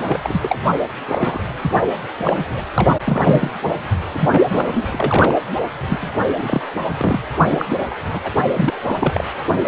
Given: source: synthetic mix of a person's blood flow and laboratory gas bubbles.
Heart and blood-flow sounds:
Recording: Doppler ultrasound of blood flow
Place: precordium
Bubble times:
0.00-0.41 s: bubbles
0.44-0.56 s: bubbles
1.07-1.41 s: bubbles
1.61-1.72 s: bubbles
2.16-2.65 s: bubbles
2.77-2.92 s: bubbles
3.04-3.50 s: bubbles
4.12-5.35 s: bubbles
5.90-6.10 s: bubbles
6.37-6.62 s: bubbles
6.87-7.20 s: bubbles
7.46-7.66 s: bubbles
7.70-7.86 s: bubbles
7.90-7.95 s: bubbles
8.12-8.20 s: bubbles
8.23-8.32 s: bubbles
8.53-8.74 s: bubbles
8.83-9.25 s: bubbles
From the record:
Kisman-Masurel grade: 232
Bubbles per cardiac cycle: several, 3 to 8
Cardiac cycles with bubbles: 50 to 99%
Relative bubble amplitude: moderate (0.250 to 0.450)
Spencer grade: 3 (all of the cardiac periods contain showers or single bubble signals, but not dominating or overriding the cardiac motion signals)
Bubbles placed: anywhere in the cardiac cycle

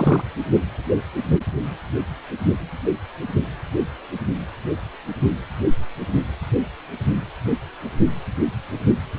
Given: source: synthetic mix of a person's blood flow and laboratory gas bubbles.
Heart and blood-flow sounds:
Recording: Doppler ultrasound of blood flow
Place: precordium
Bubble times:
0.00-0.22 s: bubbles
From the record:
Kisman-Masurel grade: 212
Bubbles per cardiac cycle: several, 3 to 8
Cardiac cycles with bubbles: 1 to 10%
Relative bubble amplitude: moderate (0.250 to 0.450)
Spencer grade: 1 (occasional bubble signal discernible with the cardiac motion signal, with majority of cardiac periods free of bubbles)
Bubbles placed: only in the low amplitude regions of the cardiac cycle

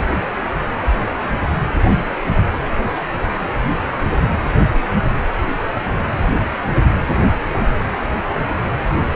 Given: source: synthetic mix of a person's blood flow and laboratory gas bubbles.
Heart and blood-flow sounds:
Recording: Doppler ultrasound of blood flow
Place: precordium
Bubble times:
no bubbles
From the record:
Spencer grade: 0 (complete lack of bubble signals)

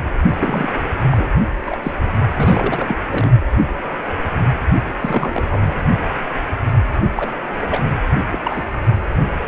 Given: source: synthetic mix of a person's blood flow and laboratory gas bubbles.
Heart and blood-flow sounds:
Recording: Doppler ultrasound of blood flow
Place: precordium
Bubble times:
0.40-0.70 s: bubbles
1.10-1.29 s: bubbles
1.67-1.77 s: bubbles
1.83-1.92 s: bubbles
2.36-2.95 s: bubbles
3.11-3.31 s: bubbles
4.99-5.73 s: bubbles
7.15-7.28 s: bubbles
7.68-7.88 s: bubbles
8.17-8.26 s: bubbles
8.32-8.38 s: bubbles
8.44-8.63 s: bubbles
From the record:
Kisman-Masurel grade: 332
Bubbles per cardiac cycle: rolling drumbeat, 9 or more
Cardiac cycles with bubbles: 50 to 99%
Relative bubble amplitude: moderate (0.250 to 0.450)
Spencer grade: 3 (all of the cardiac periods contain showers or single bubble signals, but not dominating or overriding the cardiac motion signals)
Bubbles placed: only in the low amplitude regions of the cardiac cycle

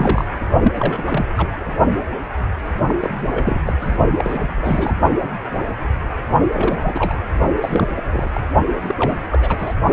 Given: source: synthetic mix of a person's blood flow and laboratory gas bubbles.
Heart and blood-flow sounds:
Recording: Doppler ultrasound of blood flow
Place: precordium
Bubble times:
0.00-0.24 s: bubbles
0.64-0.72 s: bubbles
0.77-1.25 s: bubbles
1.36-1.48 s: bubbles
1.60-1.75 s: bubbles
2.88-2.94 s: bubbles
3.00-3.59 s: bubbles
3.66-3.73 s: bubbles
3.81-3.97 s: bubbles
4.17-4.92 s: bubbles
6.53-7.17 s: bubbles
7.61-7.87 s: bubbles
7.96-8.29 s: bubbles
8.34-8.41 s: bubbles
8.80-8.96 s: bubbles
8.98-9.16 s: bubbles
9.29-9.74 s: bubbles
From the record:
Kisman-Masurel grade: 332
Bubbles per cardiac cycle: rolling drumbeat, 9 or more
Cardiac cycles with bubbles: 50 to 99%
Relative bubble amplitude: moderate (0.250 to 0.450)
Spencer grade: 3 (all of the cardiac periods contain showers or single bubble signals, but not dominating or overriding the cardiac motion signals)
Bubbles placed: only in the low amplitude regions of the cardiac cycle

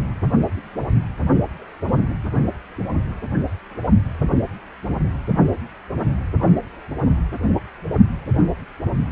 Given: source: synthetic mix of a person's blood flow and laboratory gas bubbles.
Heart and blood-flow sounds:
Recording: Doppler ultrasound of blood flow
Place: precordium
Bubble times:
no bubbles
From the record:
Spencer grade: 0 (complete lack of bubble signals)

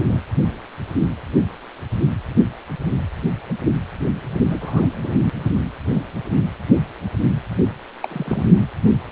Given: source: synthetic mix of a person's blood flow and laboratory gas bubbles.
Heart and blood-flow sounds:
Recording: Doppler ultrasound of blood flow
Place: precordium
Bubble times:
0.00-0.03 s: bubbles
0.08-0.21 s: bubbles
4.50-4.86 s: bubbles
5.02-5.17 s: bubbles
8.01-8.47 s: bubbles
From the record:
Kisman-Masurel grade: 222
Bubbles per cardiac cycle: several, 3 to 8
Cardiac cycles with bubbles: 10 to 50%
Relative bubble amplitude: moderate (0.250 to 0.450)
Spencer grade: 2 (many but less than half of the cardiac periods contain bubble signals, singularly or in groups)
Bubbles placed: anywhere in the cardiac cycle

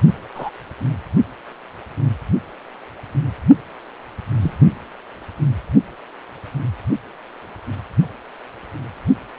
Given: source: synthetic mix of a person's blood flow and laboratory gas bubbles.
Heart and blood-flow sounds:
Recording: Doppler ultrasound of blood flow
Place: precordium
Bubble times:
0.35-0.50 s: bubbles
4.40-4.58 s: bubbles
From the record:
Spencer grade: 2 (many but less than half of the cardiac periods contain bubble signals, singularly or in groups)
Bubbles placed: only in the low amplitude regions of the cardiac cycle

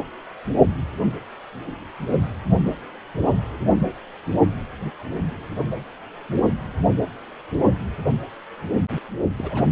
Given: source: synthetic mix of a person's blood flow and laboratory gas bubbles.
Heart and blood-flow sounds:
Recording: Doppler ultrasound of blood flow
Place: precordium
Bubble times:
8.73-8.79 s: bubbles
9.37-9.63 s: bubbles
From the record:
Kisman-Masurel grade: 211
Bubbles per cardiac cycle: several, 3 to 8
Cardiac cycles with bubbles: 1 to 10%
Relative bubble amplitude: barely perceptible (0.100 to 0.250)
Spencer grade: 1 (occasional bubble signal discernible with the cardiac motion signal, with majority of cardiac periods free of bubbles)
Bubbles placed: anywhere in the cardiac cycle

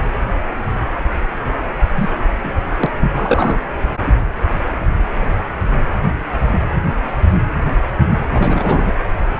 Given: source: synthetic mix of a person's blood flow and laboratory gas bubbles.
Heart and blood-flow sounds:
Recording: Doppler ultrasound of blood flow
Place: precordium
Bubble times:
1.94-2.09 s: bubbles
2.44-2.51 s: bubbles
2.78-2.86 s: bubbles
3.00-3.59 s: bubbles
8.32-8.94 s: bubbles
From the record:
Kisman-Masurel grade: 222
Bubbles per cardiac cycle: several, 3 to 8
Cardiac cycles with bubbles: 10 to 50%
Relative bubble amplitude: moderate (0.250 to 0.450)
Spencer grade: 2 (many but less than half of the cardiac periods contain bubble signals, singularly or in groups)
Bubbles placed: anywhere in the cardiac cycle

